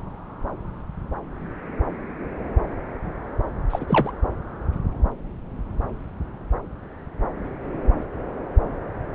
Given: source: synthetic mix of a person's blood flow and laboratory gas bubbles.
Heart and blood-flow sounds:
Doppler ultrasound of blood flow; subclavian vein
3.69-3.85 s: bubbles
3.89-4.12 s: bubbles
From the record:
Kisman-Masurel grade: 212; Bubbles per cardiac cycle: several, 3 to 8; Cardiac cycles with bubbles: 1 to 10%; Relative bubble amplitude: moderate (0.250 to 0.450); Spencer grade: 1 (occasional bubble signal discernible with the cardiac motion signal, with majority of cardiac periods free of bubbles); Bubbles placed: anywhere in the cardiac cycle

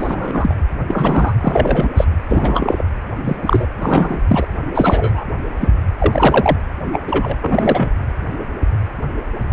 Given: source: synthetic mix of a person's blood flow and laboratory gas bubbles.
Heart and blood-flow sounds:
Doppler ultrasound of blood flow; precordium
0.00-0.56 s: bubbles
0.88-1.33 s: bubbles
1.40-1.90 s: bubbles
1.96-2.04 s: bubbles
2.28-2.82 s: bubbles
3.23-3.36 s: bubbles
3.42-3.67 s: bubbles
3.80-4.19 s: bubbles
4.28-4.48 s: bubbles
4.75-5.25 s: bubbles
5.61-5.68 s: bubbles
5.99-6.58 s: bubbles
6.93-7.01 s: bubbles
7.07-7.36 s: bubbles
7.41-7.92 s: bubbles
9.50-9.53 s: bubbles
From the record:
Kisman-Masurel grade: 233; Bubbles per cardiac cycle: several, 3 to 8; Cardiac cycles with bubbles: 50 to 99%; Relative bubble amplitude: loud (0.450 to 0.775); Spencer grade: 3 (all of the cardiac periods contain showers or single bubble signals, but not dominating or overriding the cardiac motion signals); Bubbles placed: anywhere in the cardiac cycle

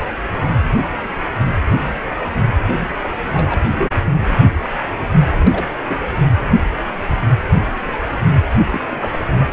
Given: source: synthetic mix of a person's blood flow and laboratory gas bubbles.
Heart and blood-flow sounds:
Doppler ultrasound of blood flow; precordium
3.29-3.89 s: bubbles
4.05-4.15 s: bubbles
4.63-4.70 s: bubbles
5.31-5.66 s: bubbles
5.88-6.05 s: bubbles
8.72-8.80 s: bubbles
8.88-9.48 s: bubbles
From the record:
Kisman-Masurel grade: 221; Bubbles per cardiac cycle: several, 3 to 8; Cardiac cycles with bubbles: 10 to 50%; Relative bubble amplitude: barely perceptible (0.100 to 0.250); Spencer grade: 2 (many but less than half of the cardiac periods contain bubble signals, singularly or in groups); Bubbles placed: anywhere in the cardiac cycle

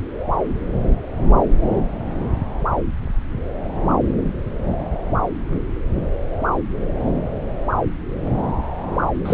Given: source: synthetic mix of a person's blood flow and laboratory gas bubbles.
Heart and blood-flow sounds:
Doppler ultrasound of blood flow; subclavian vein
9.25-9.34 s: bubbles
From the record:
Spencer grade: 1 (occasional bubble signal discernible with the cardiac motion signal, with majority of cardiac periods free of bubbles); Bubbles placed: anywhere in the cardiac cycle

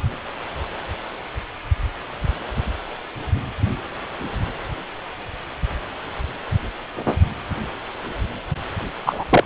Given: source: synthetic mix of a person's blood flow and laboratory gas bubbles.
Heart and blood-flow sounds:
Doppler ultrasound of blood flow; precordium
9.05-9.24 s: bubbles
9.30-9.44 s: bubbles
From the record:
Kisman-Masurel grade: 213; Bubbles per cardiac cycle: several, 3 to 8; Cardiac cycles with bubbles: 1 to 10%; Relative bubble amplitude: loud (0.450 to 0.775); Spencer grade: 1 (occasional bubble signal discernible with the cardiac motion signal, with majority of cardiac periods free of bubbles); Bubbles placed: anywhere in the cardiac cycle

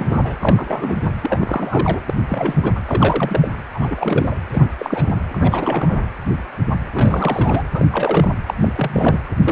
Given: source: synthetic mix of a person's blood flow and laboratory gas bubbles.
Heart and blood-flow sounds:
Doppler ultrasound of blood flow; precordium
0.00-0.21 s: bubbles
0.23-0.34 s: bubbles
0.40-1.11 s: bubbles
1.21-2.00 s: bubbles
2.08-2.13 s: bubbles
2.29-2.79 s: bubbles
2.86-3.49 s: bubbles
3.74-4.37 s: bubbles
4.53-4.69 s: bubbles
4.79-5.15 s: bubbles
5.29-6.00 s: bubbles
6.92-7.63 s: bubbles
7.73-7.86 s: bubbles
7.90-8.35 s: bubbles
8.47-8.54 s: bubbles
8.61-9.20 s: bubbles
9.45-9.52 s: bubbles
From the record:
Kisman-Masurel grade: 332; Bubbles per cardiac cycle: rolling drumbeat, 9 or more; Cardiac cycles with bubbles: 50 to 99%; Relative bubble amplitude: moderate (0.250 to 0.450); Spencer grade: 3 (all of the cardiac periods contain showers or single bubble signals, but not dominating or overriding the cardiac motion signals); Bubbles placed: anywhere in the cardiac cycle

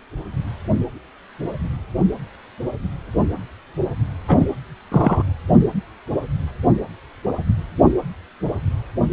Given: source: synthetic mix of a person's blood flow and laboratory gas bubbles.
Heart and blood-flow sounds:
Doppler ultrasound of blood flow; precordium
4.27-4.47 s: bubbles
4.92-5.22 s: bubbles
From the record:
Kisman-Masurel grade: 223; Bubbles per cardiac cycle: several, 3 to 8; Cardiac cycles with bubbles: 10 to 50%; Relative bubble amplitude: loud (0.450 to 0.775); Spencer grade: 2 (many but less than half of the cardiac periods contain bubble signals, singularly or in groups); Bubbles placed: anywhere in the cardiac cycle

